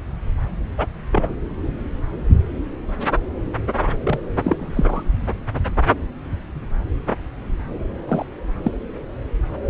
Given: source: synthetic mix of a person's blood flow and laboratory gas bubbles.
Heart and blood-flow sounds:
Doppler ultrasound of blood flow; subclavian vein
0.77-0.86 s: bubbles
1.11-1.34 s: bubbles
4.03-4.19 s: bubbles
4.44-5.04 s: bubbles
8.08-8.26 s: bubbles
8.64-8.72 s: bubbles
From the record:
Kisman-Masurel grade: 122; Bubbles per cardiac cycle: 1 to 2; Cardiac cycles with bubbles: 10 to 50%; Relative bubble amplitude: moderate (0.250 to 0.450); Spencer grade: 2 (many but less than half of the cardiac periods contain bubble signals, singularly or in groups); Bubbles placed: anywhere in the cardiac cycle

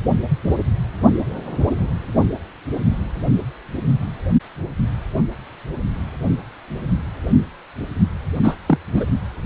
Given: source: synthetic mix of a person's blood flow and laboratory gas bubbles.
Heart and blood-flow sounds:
Doppler ultrasound of blood flow; precordium
8.43-8.57 s: bubbles
8.67-8.78 s: bubbles
8.95-9.04 s: bubbles
From the record:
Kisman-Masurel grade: 213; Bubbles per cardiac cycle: several, 3 to 8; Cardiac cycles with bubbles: 1 to 10%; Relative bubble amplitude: loud (0.450 to 0.775); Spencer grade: 1 (occasional bubble signal discernible with the cardiac motion signal, with majority of cardiac periods free of bubbles); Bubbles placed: only in the low amplitude regions of the cardiac cycle

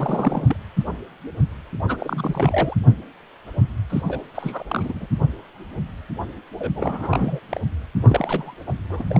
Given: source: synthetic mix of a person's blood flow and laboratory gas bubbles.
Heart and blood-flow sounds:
Doppler ultrasound of blood flow; precordium
0.00-0.56 s: bubbles
1.88-2.77 s: bubbles
3.90-4.01 s: bubbles
4.08-4.20 s: bubbles
4.34-4.63 s: bubbles
4.68-5.07 s: bubbles
6.59-6.71 s: bubbles
6.75-7.40 s: bubbles
7.49-7.58 s: bubbles
8.02-8.54 s: bubbles
8.67-8.72 s: bubbles
8.89-9.04 s: bubbles
9.07-9.20 s: bubbles
From the record:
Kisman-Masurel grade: 332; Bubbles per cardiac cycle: rolling drumbeat, 9 or more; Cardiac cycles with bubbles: 50 to 99%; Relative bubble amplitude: moderate (0.250 to 0.450); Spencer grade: 3 (all of the cardiac periods contain showers or single bubble signals, but not dominating or overriding the cardiac motion signals); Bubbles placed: anywhere in the cardiac cycle

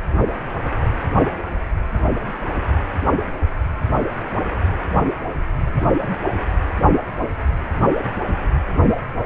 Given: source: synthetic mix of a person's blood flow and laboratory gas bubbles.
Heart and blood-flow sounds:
Doppler ultrasound of blood flow; precordium
no bubbles
From the record:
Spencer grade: 0 (complete lack of bubble signals)

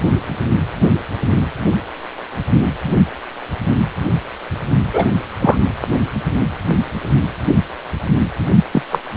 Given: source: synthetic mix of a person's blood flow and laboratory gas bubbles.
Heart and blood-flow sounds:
Doppler ultrasound of blood flow; precordium
4.93-5.07 s: bubbles
5.40-5.57 s: bubbles
8.72-8.82 s: bubbles
8.91-8.99 s: bubbles
From the record:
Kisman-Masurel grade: 113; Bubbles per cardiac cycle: 1 to 2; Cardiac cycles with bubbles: 1 to 10%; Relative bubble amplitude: loud (0.450 to 0.775); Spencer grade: 1 (occasional bubble signal discernible with the cardiac motion signal, with majority of cardiac periods free of bubbles); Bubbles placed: anywhere in the cardiac cycle

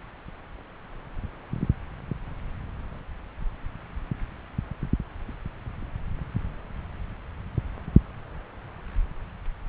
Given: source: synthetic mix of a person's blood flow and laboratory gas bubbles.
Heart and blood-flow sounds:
Doppler ultrasound of blood flow; subclavian vein
no bubbles
From the record:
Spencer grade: 0 (complete lack of bubble signals)

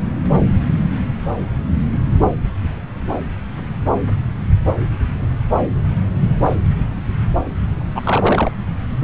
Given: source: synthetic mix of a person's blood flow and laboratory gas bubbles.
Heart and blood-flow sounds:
Doppler ultrasound of blood flow; subclavian vein
7.95-8.52 s: bubbles
From the record:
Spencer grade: 1 (occasional bubble signal discernible with the cardiac motion signal, with majority of cardiac periods free of bubbles); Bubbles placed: anywhere in the cardiac cycle

